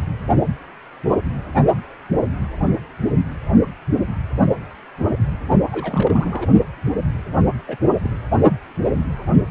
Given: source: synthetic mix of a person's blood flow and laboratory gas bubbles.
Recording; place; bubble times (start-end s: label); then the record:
Doppler ultrasound of blood flow; precordium
5.71-6.48 s: bubbles
7.67-7.77 s: bubbles
7.81-7.96 s: bubbles
8.03-8.10 s: bubbles
From the record:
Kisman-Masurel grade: 221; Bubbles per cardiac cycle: several, 3 to 8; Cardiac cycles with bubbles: 10 to 50%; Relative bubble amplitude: barely perceptible (0.100 to 0.250); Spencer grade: 2 (many but less than half of the cardiac periods contain bubble signals, singularly or in groups); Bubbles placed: only in the low amplitude regions of the cardiac cycle